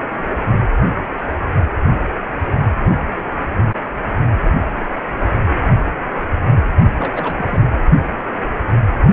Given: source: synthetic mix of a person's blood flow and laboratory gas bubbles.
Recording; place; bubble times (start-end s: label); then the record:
Doppler ultrasound of blood flow; precordium
6.97-7.35 s: bubbles
7.38-7.62 s: bubbles
From the record:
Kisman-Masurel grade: 211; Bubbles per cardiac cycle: several, 3 to 8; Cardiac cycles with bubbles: 1 to 10%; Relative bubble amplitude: barely perceptible (0.100 to 0.250); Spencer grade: 1 (occasional bubble signal discernible with the cardiac motion signal, with majority of cardiac periods free of bubbles); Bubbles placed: only in the low amplitude regions of the cardiac cycle